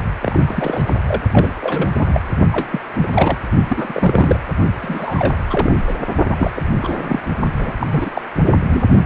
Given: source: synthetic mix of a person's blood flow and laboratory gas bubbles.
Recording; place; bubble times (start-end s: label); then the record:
Doppler ultrasound of blood flow; precordium
0.21-0.83 s: bubbles
0.87-0.94 s: bubbles
1.06-1.21 s: bubbles
1.31-1.53 s: bubbles
1.61-1.90 s: bubbles
1.97-2.21 s: bubbles
2.52-2.69 s: bubbles
2.71-2.81 s: bubbles
2.92-3.39 s: bubbles
3.68-4.38 s: bubbles
4.82-5.36 s: bubbles
5.50-5.75 s: bubbles
5.87-5.98 s: bubbles
6.30-6.51 s: bubbles
6.56-6.62 s: bubbles
6.82-7.20 s: bubbles
7.59-7.73 s: bubbles
7.80-7.87 s: bubbles
7.90-8.11 s: bubbles
8.15-8.21 s: bubbles
8.46-8.51 s: bubbles
8.68-8.84 s: bubbles
From the record:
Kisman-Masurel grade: 342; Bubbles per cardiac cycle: rolling drumbeat, 9 or more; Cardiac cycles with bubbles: 100%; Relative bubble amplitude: moderate (0.250 to 0.450); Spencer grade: 3 (all of the cardiac periods contain showers or single bubble signals, but not dominating or overriding the cardiac motion signals); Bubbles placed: only in the low amplitude regions of the cardiac cycle